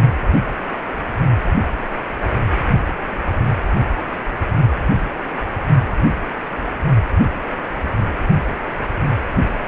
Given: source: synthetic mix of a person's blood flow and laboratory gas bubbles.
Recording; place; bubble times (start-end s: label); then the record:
Doppler ultrasound of blood flow; precordium
no bubbles
From the record:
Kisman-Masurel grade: 000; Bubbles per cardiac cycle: 0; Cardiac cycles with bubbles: 0%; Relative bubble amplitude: no bubbles discernible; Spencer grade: 0 (complete lack of bubble signals)